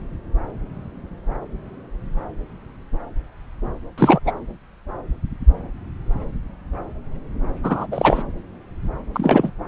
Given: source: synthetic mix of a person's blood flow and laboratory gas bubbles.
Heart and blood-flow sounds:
Doppler ultrasound of blood flow; subclavian vein
3.98-4.19 s: bubbles
4.25-4.32 s: bubbles
7.63-7.87 s: bubbles
7.91-8.23 s: bubbles
9.13-9.50 s: bubbles
From the record:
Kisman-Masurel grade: 223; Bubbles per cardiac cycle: several, 3 to 8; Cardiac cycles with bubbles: 10 to 50%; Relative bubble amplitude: loud (0.450 to 0.775); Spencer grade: 2 (many but less than half of the cardiac periods contain bubble signals, singularly or in groups); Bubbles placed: anywhere in the cardiac cycle

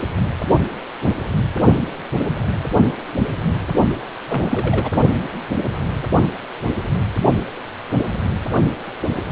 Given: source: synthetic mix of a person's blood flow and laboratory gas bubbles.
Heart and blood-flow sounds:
Doppler ultrasound of blood flow; precordium
4.27-4.92 s: bubbles
From the record:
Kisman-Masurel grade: 212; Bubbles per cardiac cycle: several, 3 to 8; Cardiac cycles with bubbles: 1 to 10%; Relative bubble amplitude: moderate (0.250 to 0.450); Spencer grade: 1 (occasional bubble signal discernible with the cardiac motion signal, with majority of cardiac periods free of bubbles); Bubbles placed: only in the low amplitude regions of the cardiac cycle

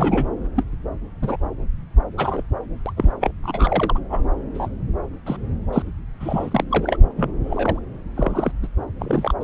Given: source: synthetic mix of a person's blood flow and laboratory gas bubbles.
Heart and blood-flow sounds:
Doppler ultrasound of blood flow; subclavian vein
0.00-0.27 s: bubbles
0.56-0.63 s: bubbles
1.22-1.36 s: bubbles
2.17-2.42 s: bubbles
2.85-2.93 s: bubbles
2.97-3.12 s: bubbles
3.20-3.31 s: bubbles
3.43-3.99 s: bubbles
4.09-4.21 s: bubbles
4.54-4.68 s: bubbles
5.26-5.36 s: bubbles
5.72-5.82 s: bubbles
6.20-6.64 s: bubbles
6.71-6.97 s: bubbles
7.17-7.31 s: bubbles
7.44-7.79 s: bubbles
8.14-8.51 s: bubbles
8.62-8.67 s: bubbles
8.98-9.33 s: bubbles
9.40-9.44 s: bubbles
From the record:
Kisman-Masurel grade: 242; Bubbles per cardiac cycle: several, 3 to 8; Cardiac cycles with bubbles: 100%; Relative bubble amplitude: moderate (0.250 to 0.450); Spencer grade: 3 (all of the cardiac periods contain showers or single bubble signals, but not dominating or overriding the cardiac motion signals); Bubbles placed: anywhere in the cardiac cycle

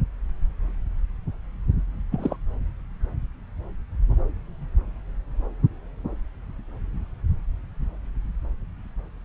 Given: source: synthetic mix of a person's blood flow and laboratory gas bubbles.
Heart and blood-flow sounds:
Doppler ultrasound of blood flow; subclavian vein
2.12-2.37 s: bubbles
From the record:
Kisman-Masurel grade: 211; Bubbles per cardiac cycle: several, 3 to 8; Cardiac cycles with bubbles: 1 to 10%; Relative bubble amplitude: barely perceptible (0.100 to 0.250); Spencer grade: 1 (occasional bubble signal discernible with the cardiac motion signal, with majority of cardiac periods free of bubbles); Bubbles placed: anywhere in the cardiac cycle

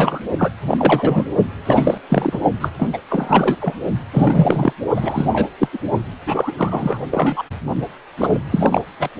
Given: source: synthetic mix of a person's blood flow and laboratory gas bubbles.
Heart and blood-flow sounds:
Doppler ultrasound of blood flow; precordium
0.00-0.21 s: bubbles
0.38-0.50 s: bubbles
0.68-1.26 s: bubbles
1.66-1.98 s: bubbles
2.10-2.40 s: bubbles
2.60-2.69 s: bubbles
2.77-2.90 s: bubbles
2.93-2.98 s: bubbles
3.09-3.57 s: bubbles
3.61-3.75 s: bubbles
4.12-4.74 s: bubbles
4.96-5.29 s: bubbles
5.32-5.49 s: bubbles
5.58-5.68 s: bubbles
5.73-5.78 s: bubbles
6.26-6.52 s: bubbles
6.58-7.02 s: bubbles
7.11-7.42 s: bubbles
8.17-8.38 s: bubbles
8.51-8.81 s: bubbles
8.99-9.08 s: bubbles
From the record:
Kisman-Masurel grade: 343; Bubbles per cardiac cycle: rolling drumbeat, 9 or more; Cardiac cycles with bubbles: 100%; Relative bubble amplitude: loud (0.450 to 0.775); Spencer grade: 3 (all of the cardiac periods contain showers or single bubble signals, but not dominating or overriding the cardiac motion signals); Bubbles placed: only in the low amplitude regions of the cardiac cycle

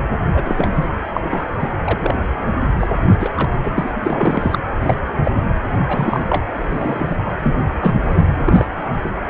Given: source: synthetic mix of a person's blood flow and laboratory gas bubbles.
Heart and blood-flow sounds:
Doppler ultrasound of blood flow; precordium
0.34-0.88 s: bubbles
1.14-1.21 s: bubbles
1.29-1.47 s: bubbles
1.59-1.70 s: bubbles
1.85-2.15 s: bubbles
2.79-2.88 s: bubbles
3.07-3.17 s: bubbles
3.20-3.33 s: bubbles
3.36-3.49 s: bubbles
3.63-3.94 s: bubbles
4.03-4.58 s: bubbles
4.80-4.96 s: bubbles
5.09-5.13 s: bubbles
5.23-5.31 s: bubbles
5.35-5.41 s: bubbles
5.81-6.45 s: bubbles
6.68-7.17 s: bubbles
7.38-7.53 s: bubbles
7.80-7.95 s: bubbles
8.04-8.26 s: bubbles
8.45-8.68 s: bubbles
9.04-9.10 s: bubbles
From the record:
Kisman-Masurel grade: 242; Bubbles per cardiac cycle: several, 3 to 8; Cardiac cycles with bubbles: 100%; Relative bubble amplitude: moderate (0.250 to 0.450); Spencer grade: 3 (all of the cardiac periods contain showers or single bubble signals, but not dominating or overriding the cardiac motion signals); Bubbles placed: anywhere in the cardiac cycle

